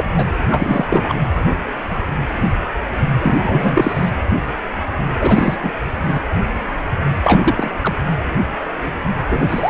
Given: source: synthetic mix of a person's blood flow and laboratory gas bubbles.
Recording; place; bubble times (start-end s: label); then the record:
Doppler ultrasound of blood flow; precordium
0.00-0.04 s: bubbles
0.16-0.28 s: bubbles
0.50-0.86 s: bubbles
0.89-1.15 s: bubbles
3.21-4.10 s: bubbles
5.21-5.57 s: bubbles
5.62-5.72 s: bubbles
6.03-6.21 s: bubbles
7.23-7.71 s: bubbles
7.81-7.95 s: bubbles
9.29-9.70 s: bubbles
From the record:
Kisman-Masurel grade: 233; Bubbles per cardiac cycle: several, 3 to 8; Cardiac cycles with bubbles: 50 to 99%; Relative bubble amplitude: loud (0.450 to 0.775); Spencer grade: 3 (all of the cardiac periods contain showers or single bubble signals, but not dominating or overriding the cardiac motion signals); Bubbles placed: anywhere in the cardiac cycle